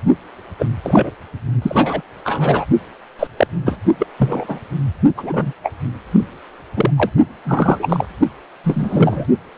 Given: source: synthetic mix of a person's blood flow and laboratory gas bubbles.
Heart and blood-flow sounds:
Doppler ultrasound of blood flow; precordium
0.59-0.66 s: bubbles
0.82-1.10 s: bubbles
1.61-2.02 s: bubbles
2.25-2.66 s: bubbles
3.19-3.27 s: bubbles
3.37-3.47 s: bubbles
3.66-3.78 s: bubbles
3.99-4.07 s: bubbles
4.19-4.62 s: bubbles
5.17-5.53 s: bubbles
5.63-5.72 s: bubbles
6.77-6.91 s: bubbles
6.97-7.10 s: bubbles
7.45-8.06 s: bubbles
8.63-9.27 s: bubbles
From the record:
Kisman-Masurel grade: 243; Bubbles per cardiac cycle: several, 3 to 8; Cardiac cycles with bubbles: 100%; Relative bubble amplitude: loud (0.450 to 0.775); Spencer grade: 3 (all of the cardiac periods contain showers or single bubble signals, but not dominating or overriding the cardiac motion signals); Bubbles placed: only in the low amplitude regions of the cardiac cycle

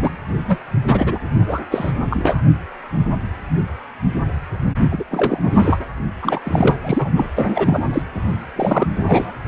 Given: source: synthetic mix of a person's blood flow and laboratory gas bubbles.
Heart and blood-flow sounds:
Doppler ultrasound of blood flow; precordium
0.00-0.16 s: bubbles
0.47-0.57 s: bubbles
0.83-1.19 s: bubbles
1.38-1.46 s: bubbles
1.48-1.60 s: bubbles
1.71-1.92 s: bubbles
2.10-2.41 s: bubbles
4.91-5.03 s: bubbles
5.10-5.79 s: bubbles
6.21-6.40 s: bubbles
6.43-6.78 s: bubbles
6.83-7.11 s: bubbles
7.16-7.30 s: bubbles
7.36-8.02 s: bubbles
8.55-9.32 s: bubbles
From the record:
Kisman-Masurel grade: 333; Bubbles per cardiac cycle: rolling drumbeat, 9 or more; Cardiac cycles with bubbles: 50 to 99%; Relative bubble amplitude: loud (0.450 to 0.775); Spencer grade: 3 (all of the cardiac periods contain showers or single bubble signals, but not dominating or overriding the cardiac motion signals); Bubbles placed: only in the low amplitude regions of the cardiac cycle

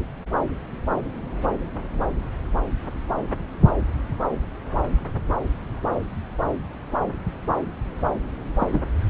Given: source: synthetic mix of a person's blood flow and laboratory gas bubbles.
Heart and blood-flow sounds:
Doppler ultrasound of blood flow; subclavian vein
8.60-8.81 s: bubbles
From the record:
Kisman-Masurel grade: 113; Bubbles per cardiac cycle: 1 to 2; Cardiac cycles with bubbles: 1 to 10%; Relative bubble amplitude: loud (0.450 to 0.775); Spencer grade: 1 (occasional bubble signal discernible with the cardiac motion signal, with majority of cardiac periods free of bubbles); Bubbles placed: anywhere in the cardiac cycle

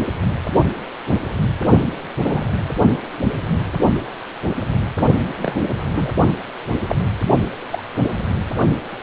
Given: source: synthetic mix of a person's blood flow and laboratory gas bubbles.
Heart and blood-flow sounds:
Doppler ultrasound of blood flow; precordium
2.22-2.45 s: bubbles
5.42-5.64 s: bubbles
5.93-6.09 s: bubbles
6.88-6.96 s: bubbles
7.71-7.83 s: bubbles
From the record:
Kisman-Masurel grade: 122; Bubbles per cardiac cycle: 1 to 2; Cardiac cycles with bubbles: 10 to 50%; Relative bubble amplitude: moderate (0.250 to 0.450); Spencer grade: 2 (many but less than half of the cardiac periods contain bubble signals, singularly or in groups); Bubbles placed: only in the low amplitude regions of the cardiac cycle

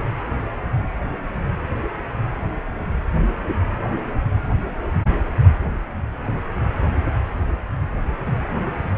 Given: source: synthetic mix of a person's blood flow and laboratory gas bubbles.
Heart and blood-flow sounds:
Doppler ultrasound of blood flow; precordium
no bubbles
From the record:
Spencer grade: 0 (complete lack of bubble signals)

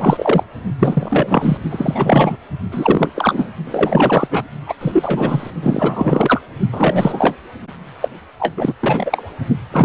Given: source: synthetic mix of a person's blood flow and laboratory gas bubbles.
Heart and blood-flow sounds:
Doppler ultrasound of blood flow; precordium
0.00-0.43 s: bubbles
0.79-1.57 s: bubbles
1.70-2.36 s: bubbles
2.71-3.10 s: bubbles
3.15-3.48 s: bubbles
3.65-4.28 s: bubbles
4.30-4.43 s: bubbles
4.66-4.74 s: bubbles
4.80-5.50 s: bubbles
5.62-6.41 s: bubbles
6.72-7.36 s: bubbles
8.02-8.08 s: bubbles
8.39-8.54 s: bubbles
8.57-8.73 s: bubbles
8.82-9.22 s: bubbles
9.72-9.84 s: bubbles
From the record:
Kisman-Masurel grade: 343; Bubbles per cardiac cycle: rolling drumbeat, 9 or more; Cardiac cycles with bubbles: 100%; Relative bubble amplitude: loud (0.450 to 0.775); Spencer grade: 3 (all of the cardiac periods contain showers or single bubble signals, but not dominating or overriding the cardiac motion signals); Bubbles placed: only in the low amplitude regions of the cardiac cycle

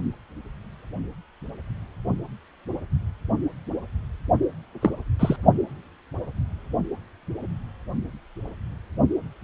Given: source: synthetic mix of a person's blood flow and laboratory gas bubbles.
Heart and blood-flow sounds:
Doppler ultrasound of blood flow; precordium
4.81-4.90 s: bubbles
5.19-5.36 s: bubbles
From the record:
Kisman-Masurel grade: 112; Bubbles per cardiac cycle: 1 to 2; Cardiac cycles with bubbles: 1 to 10%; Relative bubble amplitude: moderate (0.250 to 0.450); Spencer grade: 1 (occasional bubble signal discernible with the cardiac motion signal, with majority of cardiac periods free of bubbles); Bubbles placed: only in the low amplitude regions of the cardiac cycle

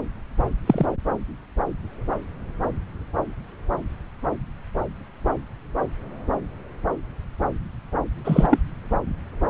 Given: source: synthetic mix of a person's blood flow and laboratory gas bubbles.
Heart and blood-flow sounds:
Doppler ultrasound of blood flow; subclavian vein
0.66-0.86 s: bubbles
8.25-8.48 s: bubbles
8.51-8.59 s: bubbles
From the record:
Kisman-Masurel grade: 123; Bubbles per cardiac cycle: 1 to 2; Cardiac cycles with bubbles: 10 to 50%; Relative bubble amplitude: loud (0.450 to 0.775); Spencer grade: 2 (many but less than half of the cardiac periods contain bubble signals, singularly or in groups); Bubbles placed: anywhere in the cardiac cycle

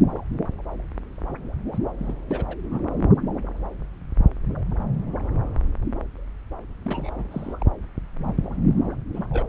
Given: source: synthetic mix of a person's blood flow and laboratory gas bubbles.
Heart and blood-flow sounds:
Doppler ultrasound of blood flow; subclavian vein
1.72-1.78 s: bubbles
1.99-2.16 s: bubbles
2.27-2.57 s: bubbles
2.62-2.84 s: bubbles
6.84-7.10 s: bubbles
7.15-7.27 s: bubbles
7.31-7.54 s: bubbles
7.61-7.65 s: bubbles
9.13-9.26 s: bubbles
9.30-9.43 s: bubbles
From the record:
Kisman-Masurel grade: 221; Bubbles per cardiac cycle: several, 3 to 8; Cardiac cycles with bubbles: 10 to 50%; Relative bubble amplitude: barely perceptible (0.100 to 0.250); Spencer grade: 2 (many but less than half of the cardiac periods contain bubble signals, singularly or in groups); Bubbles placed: anywhere in the cardiac cycle

